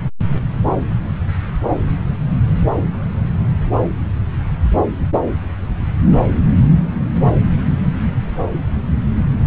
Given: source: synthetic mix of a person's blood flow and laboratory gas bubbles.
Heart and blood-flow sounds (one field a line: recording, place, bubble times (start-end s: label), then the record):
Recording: Doppler ultrasound of blood flow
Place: subclavian vein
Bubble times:
no bubbles
From the record:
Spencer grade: 0 (complete lack of bubble signals)